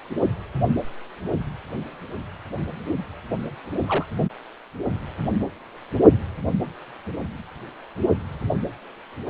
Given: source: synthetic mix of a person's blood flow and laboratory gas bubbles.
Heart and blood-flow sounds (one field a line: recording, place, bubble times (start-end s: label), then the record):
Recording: Doppler ultrasound of blood flow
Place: precordium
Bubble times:
3.86-4.05 s: bubbles
From the record:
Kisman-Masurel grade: 111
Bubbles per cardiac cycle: 1 to 2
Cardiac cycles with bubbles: 1 to 10%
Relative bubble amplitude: barely perceptible (0.100 to 0.250)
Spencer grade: 1 (occasional bubble signal discernible with the cardiac motion signal, with majority of cardiac periods free of bubbles)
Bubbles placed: anywhere in the cardiac cycle